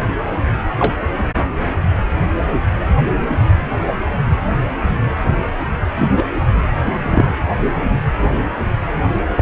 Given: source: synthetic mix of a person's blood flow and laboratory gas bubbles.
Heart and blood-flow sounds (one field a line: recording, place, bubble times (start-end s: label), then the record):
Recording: Doppler ultrasound of blood flow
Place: precordium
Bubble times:
0.79-0.93 s: bubbles
5.99-6.09 s: bubbles
6.17-6.25 s: bubbles
6.82-7.26 s: bubbles
9.35-9.42 s: bubbles
From the record:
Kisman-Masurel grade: 123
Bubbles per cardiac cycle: 1 to 2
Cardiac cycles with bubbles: 10 to 50%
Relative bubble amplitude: loud (0.450 to 0.775)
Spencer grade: 2 (many but less than half of the cardiac periods contain bubble signals, singularly or in groups)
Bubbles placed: anywhere in the cardiac cycle